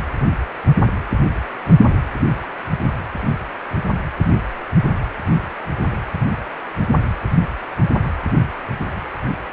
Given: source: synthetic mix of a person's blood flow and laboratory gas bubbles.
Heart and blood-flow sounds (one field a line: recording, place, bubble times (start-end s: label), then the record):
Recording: Doppler ultrasound of blood flow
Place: precordium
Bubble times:
no bubbles
From the record:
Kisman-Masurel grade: 000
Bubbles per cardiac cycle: 0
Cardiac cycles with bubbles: 0%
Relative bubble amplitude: no bubbles discernible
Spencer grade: 0 (complete lack of bubble signals)